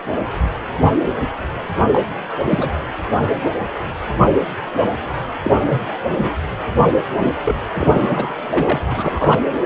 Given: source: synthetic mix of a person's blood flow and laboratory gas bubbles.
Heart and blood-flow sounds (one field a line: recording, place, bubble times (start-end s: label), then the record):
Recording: Doppler ultrasound of blood flow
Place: precordium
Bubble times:
1.92-2.00 s: bubbles
2.49-2.71 s: bubbles
5.42-5.51 s: bubbles
5.69-5.80 s: bubbles
6.17-6.32 s: bubbles
7.17-7.33 s: bubbles
7.46-7.55 s: bubbles
7.71-8.33 s: bubbles
8.50-8.79 s: bubbles
8.82-8.86 s: bubbles
8.88-9.40 s: bubbles
From the record:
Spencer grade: 2 (many but less than half of the cardiac periods contain bubble signals, singularly or in groups)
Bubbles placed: anywhere in the cardiac cycle